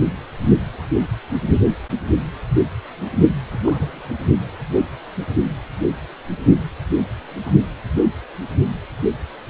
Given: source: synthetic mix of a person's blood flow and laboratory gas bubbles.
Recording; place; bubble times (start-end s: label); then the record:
Doppler ultrasound of blood flow; precordium
3.51-4.08 s: bubbles
From the record:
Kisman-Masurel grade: 211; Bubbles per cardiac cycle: several, 3 to 8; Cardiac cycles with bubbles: 1 to 10%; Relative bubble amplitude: barely perceptible (0.100 to 0.250); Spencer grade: 1 (occasional bubble signal discernible with the cardiac motion signal, with majority of cardiac periods free of bubbles); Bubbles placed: anywhere in the cardiac cycle